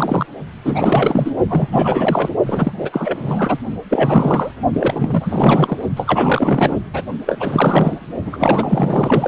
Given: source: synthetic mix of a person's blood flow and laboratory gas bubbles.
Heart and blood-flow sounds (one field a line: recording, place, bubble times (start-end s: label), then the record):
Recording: Doppler ultrasound of blood flow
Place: precordium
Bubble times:
0.00-0.26 s: bubbles
0.64-1.31 s: bubbles
1.49-1.67 s: bubbles
1.71-2.30 s: bubbles
2.46-2.72 s: bubbles
2.78-2.90 s: bubbles
2.92-3.58 s: bubbles
3.90-4.52 s: bubbles
4.74-5.76 s: bubbles
5.96-6.76 s: bubbles
6.93-7.03 s: bubbles
7.25-7.98 s: bubbles
8.25-9.28 s: bubbles
From the record:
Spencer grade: 4 (maximum detectable bubble signal sounding continuously throughout systole and diastole of every cardiac period, and overriding the amplitude of the normal cardiac signals)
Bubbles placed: only in the low amplitude regions of the cardiac cycle